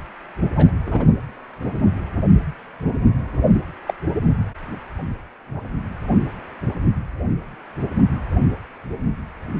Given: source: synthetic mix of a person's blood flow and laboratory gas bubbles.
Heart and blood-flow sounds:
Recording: Doppler ultrasound of blood flow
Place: precordium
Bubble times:
0.55-0.68 s: bubbles
0.86-1.04 s: bubbles
3.86-3.94 s: bubbles
From the record:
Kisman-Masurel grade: 122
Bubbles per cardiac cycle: 1 to 2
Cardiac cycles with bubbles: 10 to 50%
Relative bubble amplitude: moderate (0.250 to 0.450)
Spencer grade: 2 (many but less than half of the cardiac periods contain bubble signals, singularly or in groups)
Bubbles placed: anywhere in the cardiac cycle

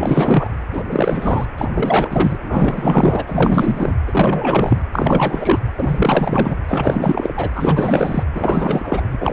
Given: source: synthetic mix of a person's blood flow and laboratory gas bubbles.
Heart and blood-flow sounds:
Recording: Doppler ultrasound of blood flow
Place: precordium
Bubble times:
0.00-0.51 s: bubbles
0.72-0.83 s: bubbles
0.91-1.46 s: bubbles
1.57-2.38 s: bubbles
2.42-3.22 s: bubbles
3.26-3.96 s: bubbles
4.07-4.83 s: bubbles
4.92-5.59 s: bubbles
5.77-6.56 s: bubbles
6.68-7.32 s: bubbles
7.35-7.50 s: bubbles
7.54-8.24 s: bubbles
8.34-9.16 s: bubbles
9.21-9.33 s: bubbles
From the record:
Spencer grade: 4 (maximum detectable bubble signal sounding continuously throughout systole and diastole of every cardiac period, and overriding the amplitude of the normal cardiac signals)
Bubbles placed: anywhere in the cardiac cycle

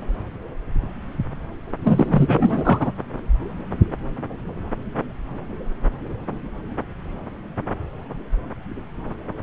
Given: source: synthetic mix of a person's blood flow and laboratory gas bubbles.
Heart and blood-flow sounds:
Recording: Doppler ultrasound of blood flow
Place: subclavian vein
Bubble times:
1.84-2.91 s: bubbles
From the record:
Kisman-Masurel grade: 213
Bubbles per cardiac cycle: several, 3 to 8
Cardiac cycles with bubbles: 1 to 10%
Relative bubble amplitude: loud (0.450 to 0.775)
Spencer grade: 1 (occasional bubble signal discernible with the cardiac motion signal, with majority of cardiac periods free of bubbles)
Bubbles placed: anywhere in the cardiac cycle

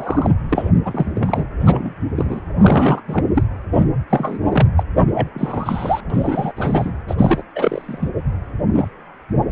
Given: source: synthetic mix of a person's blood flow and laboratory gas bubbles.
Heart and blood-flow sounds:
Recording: Doppler ultrasound of blood flow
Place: precordium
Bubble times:
0.00-0.33 s: bubbles
0.48-0.71 s: bubbles
0.84-1.11 s: bubbles
1.14-1.46 s: bubbles
1.60-1.95 s: bubbles
2.16-2.41 s: bubbles
2.58-3.02 s: bubbles
3.08-3.24 s: bubbles
3.34-3.43 s: bubbles
4.10-4.38 s: bubbles
4.52-4.67 s: bubbles
4.77-4.83 s: bubbles
5.13-5.29 s: bubbles
5.34-6.00 s: bubbles
6.10-6.53 s: bubbles
6.57-6.92 s: bubbles
7.08-7.15 s: bubbles
7.17-7.42 s: bubbles
7.55-8.09 s: bubbles
8.73-8.88 s: bubbles
From the record:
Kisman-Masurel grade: 243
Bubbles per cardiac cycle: several, 3 to 8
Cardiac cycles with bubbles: 100%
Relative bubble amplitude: loud (0.450 to 0.775)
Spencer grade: 3 (all of the cardiac periods contain showers or single bubble signals, but not dominating or overriding the cardiac motion signals)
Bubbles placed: anywhere in the cardiac cycle

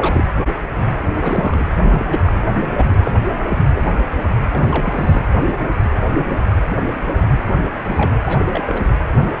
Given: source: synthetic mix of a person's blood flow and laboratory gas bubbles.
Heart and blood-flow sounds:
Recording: Doppler ultrasound of blood flow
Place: precordium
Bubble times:
0.00-0.24 s: bubbles
1.13-1.75 s: bubbles
1.83-2.19 s: bubbles
2.25-2.33 s: bubbles
2.77-3.18 s: bubbles
3.48-3.58 s: bubbles
3.75-3.92 s: bubbles
4.51-5.29 s: bubbles
7.85-8.18 s: bubbles
8.22-8.44 s: bubbles
8.53-8.62 s: bubbles
8.65-8.80 s: bubbles
From the record:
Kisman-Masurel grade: 222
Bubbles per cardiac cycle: several, 3 to 8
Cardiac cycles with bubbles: 10 to 50%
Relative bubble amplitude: moderate (0.250 to 0.450)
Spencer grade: 2 (many but less than half of the cardiac periods contain bubble signals, singularly or in groups)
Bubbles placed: anywhere in the cardiac cycle

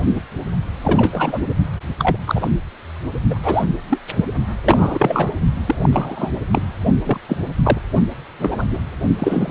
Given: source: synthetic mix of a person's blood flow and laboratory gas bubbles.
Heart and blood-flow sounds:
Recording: Doppler ultrasound of blood flow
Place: precordium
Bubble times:
0.00-0.05 s: bubbles
0.15-0.21 s: bubbles
0.82-1.43 s: bubbles
1.99-2.18 s: bubbles
2.26-2.49 s: bubbles
3.29-3.38 s: bubbles
3.44-3.64 s: bubbles
3.89-3.98 s: bubbles
4.16-4.25 s: bubbles
4.64-5.33 s: bubbles
5.66-5.75 s: bubbles
5.82-5.89 s: bubbles
5.92-6.31 s: bubbles
6.51-6.64 s: bubbles
7.04-7.18 s: bubbles
7.28-7.37 s: bubbles
7.62-7.79 s: bubbles
8.38-8.66 s: bubbles
8.71-8.80 s: bubbles
9.19-9.51 s: bubbles
From the record:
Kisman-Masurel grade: 243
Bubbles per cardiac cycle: several, 3 to 8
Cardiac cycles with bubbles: 100%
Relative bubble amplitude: loud (0.450 to 0.775)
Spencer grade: 3 (all of the cardiac periods contain showers or single bubble signals, but not dominating or overriding the cardiac motion signals)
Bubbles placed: only in the low amplitude regions of the cardiac cycle

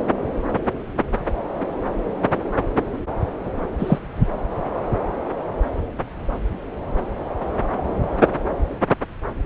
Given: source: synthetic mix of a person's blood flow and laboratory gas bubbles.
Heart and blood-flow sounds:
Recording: Doppler ultrasound of blood flow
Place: subclavian vein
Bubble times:
3.79-3.98 s: bubbles
From the record:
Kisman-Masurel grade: 113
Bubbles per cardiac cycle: 1 to 2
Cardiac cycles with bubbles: 1 to 10%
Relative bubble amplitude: loud (0.450 to 0.775)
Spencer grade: 1 (occasional bubble signal discernible with the cardiac motion signal, with majority of cardiac periods free of bubbles)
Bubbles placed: anywhere in the cardiac cycle

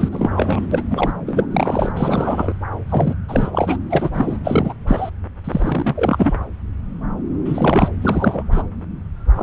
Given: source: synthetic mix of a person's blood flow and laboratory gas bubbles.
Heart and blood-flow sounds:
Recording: Doppler ultrasound of blood flow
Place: subclavian vein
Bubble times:
0.00-0.09 s: bubbles
0.11-0.66 s: bubbles
0.71-0.83 s: bubbles
0.90-1.12 s: bubbles
1.27-1.46 s: bubbles
1.51-1.92 s: bubbles
1.96-2.53 s: bubbles
2.89-3.14 s: bubbles
3.28-3.76 s: bubbles
3.89-4.10 s: bubbles
4.13-4.38 s: bubbles
4.43-4.74 s: bubbles
4.87-5.09 s: bubbles
5.44-6.34 s: bubbles
7.45-7.89 s: bubbles
8.02-8.43 s: bubbles
8.52-8.62 s: bubbles
9.35-9.43 s: bubbles
From the record:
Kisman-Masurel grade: 333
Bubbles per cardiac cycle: rolling drumbeat, 9 or more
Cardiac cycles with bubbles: 50 to 99%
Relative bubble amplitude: loud (0.450 to 0.775)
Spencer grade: 3 (all of the cardiac periods contain showers or single bubble signals, but not dominating or overriding the cardiac motion signals)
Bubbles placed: anywhere in the cardiac cycle

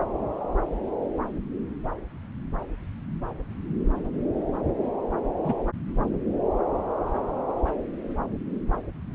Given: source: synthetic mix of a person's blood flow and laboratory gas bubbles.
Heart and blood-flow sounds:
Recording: Doppler ultrasound of blood flow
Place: subclavian vein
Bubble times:
5.44-5.54 s: bubbles
From the record:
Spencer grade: 1 (occasional bubble signal discernible with the cardiac motion signal, with majority of cardiac periods free of bubbles)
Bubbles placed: anywhere in the cardiac cycle

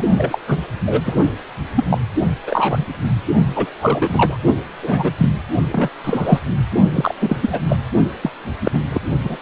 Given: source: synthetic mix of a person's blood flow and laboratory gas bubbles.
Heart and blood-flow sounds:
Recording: Doppler ultrasound of blood flow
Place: precordium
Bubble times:
0.00-0.03 s: bubbles
0.16-0.40 s: bubbles
0.48-0.57 s: bubbles
0.85-1.32 s: bubbles
1.75-1.85 s: bubbles
1.89-1.98 s: bubbles
2.46-2.84 s: bubbles
3.55-3.66 s: bubbles
3.81-4.38 s: bubbles
4.83-5.11 s: bubbles
5.18-5.29 s: bubbles
5.71-5.89 s: bubbles
6.04-6.39 s: bubbles
6.93-7.15 s: bubbles
7.20-7.37 s: bubbles
7.41-7.62 s: bubbles
7.68-7.77 s: bubbles
8.22-8.30 s: bubbles
8.63-8.79 s: bubbles
8.88-9.02 s: bubbles
9.23-9.37 s: bubbles
From the record:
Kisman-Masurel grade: 243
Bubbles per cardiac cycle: several, 3 to 8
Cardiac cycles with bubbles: 100%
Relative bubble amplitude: loud (0.450 to 0.775)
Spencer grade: 3 (all of the cardiac periods contain showers or single bubble signals, but not dominating or overriding the cardiac motion signals)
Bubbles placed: only in the low amplitude regions of the cardiac cycle

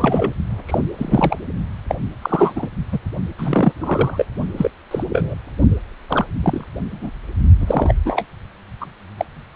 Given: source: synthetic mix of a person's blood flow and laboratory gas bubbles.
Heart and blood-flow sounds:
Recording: Doppler ultrasound of blood flow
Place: precordium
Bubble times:
0.00-0.34 s: bubbles
0.67-0.78 s: bubbles
0.98-1.39 s: bubbles
1.89-1.95 s: bubbles
2.22-2.69 s: bubbles
2.92-2.99 s: bubbles
3.38-3.73 s: bubbles
3.79-4.25 s: bubbles
4.57-4.71 s: bubbles
4.91-5.04 s: bubbles
5.12-5.35 s: bubbles
6.09-6.25 s: bubbles
6.43-6.65 s: bubbles
6.91-7.22 s: bubbles
7.60-7.94 s: bubbles
8.04-8.26 s: bubbles
8.80-8.87 s: bubbles
9.17-9.25 s: bubbles
From the record:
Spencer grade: 3 (all of the cardiac periods contain showers or single bubble signals, but not dominating or overriding the cardiac motion signals)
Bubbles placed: only in the low amplitude regions of the cardiac cycle

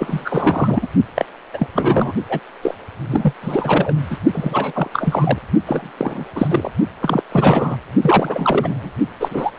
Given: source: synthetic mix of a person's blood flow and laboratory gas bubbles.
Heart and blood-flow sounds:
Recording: Doppler ultrasound of blood flow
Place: precordium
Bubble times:
0.00-0.87 s: bubbles
1.15-1.25 s: bubbles
1.53-1.67 s: bubbles
1.73-2.13 s: bubbles
2.29-2.40 s: bubbles
2.62-2.75 s: bubbles
3.10-3.33 s: bubbles
3.42-3.95 s: bubbles
4.10-4.18 s: bubbles
4.32-4.88 s: bubbles
4.92-5.38 s: bubbles
5.66-5.90 s: bubbles
5.97-6.25 s: bubbles
6.35-6.71 s: bubbles
7.01-7.21 s: bubbles
7.31-7.76 s: bubbles
8.03-8.91 s: bubbles
9.20-9.51 s: bubbles
From the record:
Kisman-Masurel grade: 343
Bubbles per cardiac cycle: rolling drumbeat, 9 or more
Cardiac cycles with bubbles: 100%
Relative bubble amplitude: loud (0.450 to 0.775)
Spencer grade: 3 (all of the cardiac periods contain showers or single bubble signals, but not dominating or overriding the cardiac motion signals)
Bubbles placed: only in the low amplitude regions of the cardiac cycle

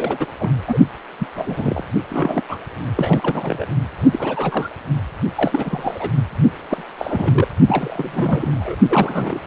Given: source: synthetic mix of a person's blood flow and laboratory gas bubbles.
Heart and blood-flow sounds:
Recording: Doppler ultrasound of blood flow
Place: precordium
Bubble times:
0.00-0.27 s: bubbles
0.39-0.49 s: bubbles
0.67-0.78 s: bubbles
1.19-1.27 s: bubbles
1.35-1.84 s: bubbles
2.10-2.42 s: bubbles
2.49-2.58 s: bubbles
2.96-3.66 s: bubbles
4.11-4.69 s: bubbles
5.37-6.10 s: bubbles
6.70-6.85 s: bubbles
6.98-7.48 s: bubbles
7.67-8.76 s: bubbles
8.87-9.40 s: bubbles
9.45-9.47 s: bubbles
From the record:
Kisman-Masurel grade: 342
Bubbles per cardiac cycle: rolling drumbeat, 9 or more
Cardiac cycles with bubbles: 100%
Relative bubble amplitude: moderate (0.250 to 0.450)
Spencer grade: 3 (all of the cardiac periods contain showers or single bubble signals, but not dominating or overriding the cardiac motion signals)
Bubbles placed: only in the low amplitude regions of the cardiac cycle

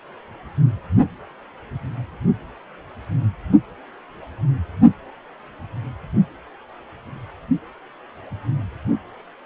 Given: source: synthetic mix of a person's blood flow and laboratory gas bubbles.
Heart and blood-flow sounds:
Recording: Doppler ultrasound of blood flow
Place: precordium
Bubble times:
no bubbles
From the record:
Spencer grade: 0 (complete lack of bubble signals)

